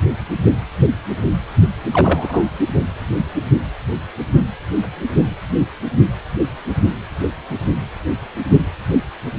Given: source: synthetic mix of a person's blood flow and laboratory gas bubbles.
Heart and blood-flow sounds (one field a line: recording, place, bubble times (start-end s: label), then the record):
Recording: Doppler ultrasound of blood flow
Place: precordium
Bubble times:
1.93-2.44 s: bubbles
From the record:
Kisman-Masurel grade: 113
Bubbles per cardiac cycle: 1 to 2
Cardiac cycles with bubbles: 1 to 10%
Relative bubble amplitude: loud (0.450 to 0.775)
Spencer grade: 1 (occasional bubble signal discernible with the cardiac motion signal, with majority of cardiac periods free of bubbles)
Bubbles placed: only in the low amplitude regions of the cardiac cycle